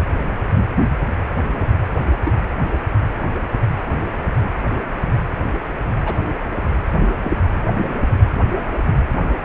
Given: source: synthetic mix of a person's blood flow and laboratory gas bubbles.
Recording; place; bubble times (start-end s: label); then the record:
Doppler ultrasound of blood flow; precordium
2.25-2.31 s: bubbles
6.02-6.18 s: bubbles
7.22-7.32 s: bubbles
From the record:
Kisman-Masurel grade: 122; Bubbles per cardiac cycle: 1 to 2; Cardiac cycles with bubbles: 10 to 50%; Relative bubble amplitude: moderate (0.250 to 0.450); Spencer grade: 2 (many but less than half of the cardiac periods contain bubble signals, singularly or in groups); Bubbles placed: anywhere in the cardiac cycle